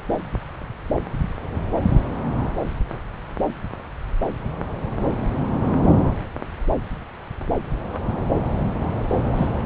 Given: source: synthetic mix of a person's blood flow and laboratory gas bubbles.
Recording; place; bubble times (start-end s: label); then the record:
Doppler ultrasound of blood flow; subclavian vein
9.36-9.46 s: bubbles
From the record:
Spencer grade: 1 (occasional bubble signal discernible with the cardiac motion signal, with majority of cardiac periods free of bubbles); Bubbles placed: anywhere in the cardiac cycle